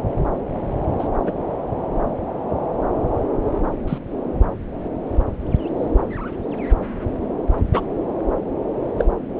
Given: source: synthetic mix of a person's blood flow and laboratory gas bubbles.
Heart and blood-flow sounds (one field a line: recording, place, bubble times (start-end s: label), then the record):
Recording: Doppler ultrasound of blood flow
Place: subclavian vein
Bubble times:
0.99-1.08 s: bubbles
1.26-1.32 s: bubbles
3.87-3.98 s: bubbles
7.73-7.81 s: bubbles
8.98-9.05 s: bubbles
9.38-9.40 s: bubbles
From the record:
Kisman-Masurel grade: 123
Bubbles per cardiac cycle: 1 to 2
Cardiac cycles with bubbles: 10 to 50%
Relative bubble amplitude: loud (0.450 to 0.775)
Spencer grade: 2 (many but less than half of the cardiac periods contain bubble signals, singularly or in groups)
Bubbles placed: anywhere in the cardiac cycle